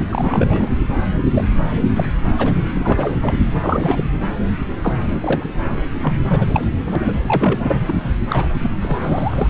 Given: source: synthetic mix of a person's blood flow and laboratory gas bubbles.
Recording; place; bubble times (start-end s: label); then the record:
Doppler ultrasound of blood flow; subclavian vein
0.00-0.06 s: bubbles
0.09-0.70 s: bubbles
1.34-1.44 s: bubbles
1.75-1.82 s: bubbles
1.96-2.05 s: bubbles
2.38-2.51 s: bubbles
2.75-3.16 s: bubbles
3.21-3.34 s: bubbles
3.61-4.04 s: bubbles
4.81-4.95 s: bubbles
5.21-5.43 s: bubbles
5.64-5.84 s: bubbles
6.02-6.13 s: bubbles
6.27-6.46 s: bubbles
6.54-6.65 s: bubbles
6.85-6.96 s: bubbles
7.01-7.14 s: bubbles
7.23-7.61 s: bubbles
7.63-7.82 s: bubbles
7.86-7.94 s: bubbles
8.28-8.47 s: bubbles
8.59-8.70 s: bubbles
8.81-9.47 s: bubbles
From the record:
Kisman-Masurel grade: 242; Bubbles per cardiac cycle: several, 3 to 8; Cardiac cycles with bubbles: 100%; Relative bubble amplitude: moderate (0.250 to 0.450); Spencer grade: 3 (all of the cardiac periods contain showers or single bubble signals, but not dominating or overriding the cardiac motion signals); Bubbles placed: anywhere in the cardiac cycle